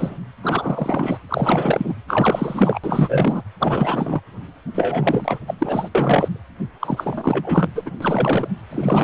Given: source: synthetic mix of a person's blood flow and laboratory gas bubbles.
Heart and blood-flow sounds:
Doppler ultrasound of blood flow; precordium
0.00-0.17 s: bubbles
0.43-1.18 s: bubbles
1.28-1.95 s: bubbles
2.08-2.79 s: bubbles
2.83-3.42 s: bubbles
3.60-4.21 s: bubbles
4.74-5.38 s: bubbles
5.47-5.54 s: bubbles
5.59-5.89 s: bubbles
5.95-6.40 s: bubbles
6.80-7.72 s: bubbles
7.75-7.91 s: bubbles
8.00-8.48 s: bubbles
8.71-9.04 s: bubbles
From the record:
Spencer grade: 4 (maximum detectable bubble signal sounding continuously throughout systole and diastole of every cardiac period, and overriding the amplitude of the normal cardiac signals); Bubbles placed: anywhere in the cardiac cycle

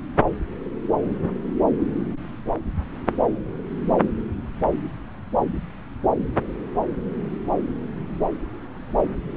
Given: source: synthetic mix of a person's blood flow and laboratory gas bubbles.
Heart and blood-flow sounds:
Doppler ultrasound of blood flow; subclavian vein
no bubbles
From the record:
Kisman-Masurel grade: 000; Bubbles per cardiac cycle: 0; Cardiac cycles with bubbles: 0%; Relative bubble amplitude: no bubbles discernible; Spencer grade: 0 (complete lack of bubble signals)

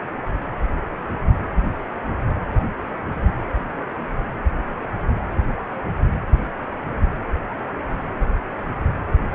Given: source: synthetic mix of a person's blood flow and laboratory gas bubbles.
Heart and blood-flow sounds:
Doppler ultrasound of blood flow; precordium
no bubbles
From the record:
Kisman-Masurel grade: 000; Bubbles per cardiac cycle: 0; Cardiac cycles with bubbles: 0%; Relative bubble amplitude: no bubbles discernible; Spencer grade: 0 (complete lack of bubble signals)

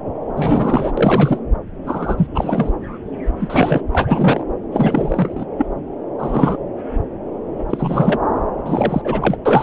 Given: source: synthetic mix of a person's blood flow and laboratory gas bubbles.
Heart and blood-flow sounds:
Doppler ultrasound of blood flow; subclavian vein
0.36-0.93 s: bubbles
0.97-1.41 s: bubbles
1.86-2.27 s: bubbles
2.34-2.70 s: bubbles
3.39-3.81 s: bubbles
3.92-4.43 s: bubbles
4.71-5.46 s: bubbles
5.58-5.67 s: bubbles
6.18-6.58 s: bubbles
7.69-8.19 s: bubbles
8.65-9.02 s: bubbles
9.04-9.37 s: bubbles
9.45-9.63 s: bubbles
From the record:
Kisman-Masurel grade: 333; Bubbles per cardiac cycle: rolling drumbeat, 9 or more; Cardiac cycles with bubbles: 50 to 99%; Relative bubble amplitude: loud (0.450 to 0.775); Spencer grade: 3 (all of the cardiac periods contain showers or single bubble signals, but not dominating or overriding the cardiac motion signals); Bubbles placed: anywhere in the cardiac cycle

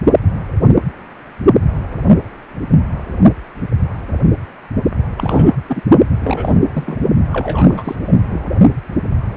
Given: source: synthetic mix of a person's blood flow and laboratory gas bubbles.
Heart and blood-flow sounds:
Doppler ultrasound of blood flow; precordium
5.17-5.55 s: bubbles
5.68-5.82 s: bubbles
6.22-6.99 s: bubbles
7.33-7.95 s: bubbles
8.06-8.49 s: bubbles
From the record:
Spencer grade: 2 (many but less than half of the cardiac periods contain bubble signals, singularly or in groups); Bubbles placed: only in the low amplitude regions of the cardiac cycle

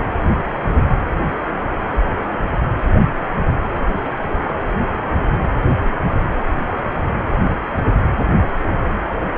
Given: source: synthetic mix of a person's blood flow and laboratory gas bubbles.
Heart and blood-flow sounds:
Doppler ultrasound of blood flow; precordium
3.73-3.81 s: bubbles
4.43-4.58 s: bubbles
From the record:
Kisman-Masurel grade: 111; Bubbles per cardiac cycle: 1 to 2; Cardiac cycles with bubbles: 1 to 10%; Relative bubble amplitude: barely perceptible (0.100 to 0.250); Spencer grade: 1 (occasional bubble signal discernible with the cardiac motion signal, with majority of cardiac periods free of bubbles); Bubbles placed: anywhere in the cardiac cycle

